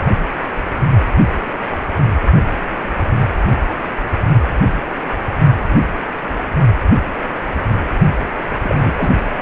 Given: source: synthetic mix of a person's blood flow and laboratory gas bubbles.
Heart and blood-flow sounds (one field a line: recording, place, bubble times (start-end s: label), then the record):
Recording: Doppler ultrasound of blood flow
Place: precordium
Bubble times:
8.63-9.12 s: bubbles
From the record:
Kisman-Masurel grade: 212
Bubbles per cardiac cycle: several, 3 to 8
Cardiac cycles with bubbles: 1 to 10%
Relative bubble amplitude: moderate (0.250 to 0.450)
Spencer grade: 1 (occasional bubble signal discernible with the cardiac motion signal, with majority of cardiac periods free of bubbles)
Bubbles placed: only in the low amplitude regions of the cardiac cycle